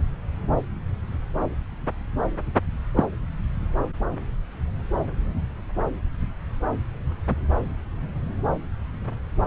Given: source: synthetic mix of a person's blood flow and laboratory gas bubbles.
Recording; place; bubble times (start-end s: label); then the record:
Doppler ultrasound of blood flow; subclavian vein
2.95-3.04 s: bubbles
From the record:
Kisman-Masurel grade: 122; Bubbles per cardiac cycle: 1 to 2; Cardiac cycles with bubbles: 10 to 50%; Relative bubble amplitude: moderate (0.250 to 0.450); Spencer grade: 2 (many but less than half of the cardiac periods contain bubble signals, singularly or in groups); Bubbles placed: anywhere in the cardiac cycle